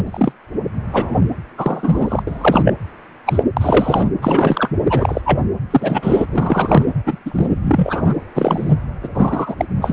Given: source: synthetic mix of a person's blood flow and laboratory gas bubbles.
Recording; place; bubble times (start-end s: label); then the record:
Doppler ultrasound of blood flow; precordium
0.04-0.33 s: bubbles
0.93-1.21 s: bubbles
1.57-2.23 s: bubbles
2.27-2.73 s: bubbles
3.26-3.43 s: bubbles
3.56-4.09 s: bubbles
4.21-4.70 s: bubbles
4.85-5.21 s: bubbles
5.25-5.40 s: bubbles
5.71-6.26 s: bubbles
6.30-6.86 s: bubbles
7.06-7.17 s: bubbles
7.25-8.13 s: bubbles
8.35-8.74 s: bubbles
9.03-9.07 s: bubbles
9.14-9.65 s: bubbles
9.81-9.93 s: bubbles
From the record:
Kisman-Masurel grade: 243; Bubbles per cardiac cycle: several, 3 to 8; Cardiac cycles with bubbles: 100%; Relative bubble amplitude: loud (0.450 to 0.775); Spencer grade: 3 (all of the cardiac periods contain showers or single bubble signals, but not dominating or overriding the cardiac motion signals); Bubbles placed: anywhere in the cardiac cycle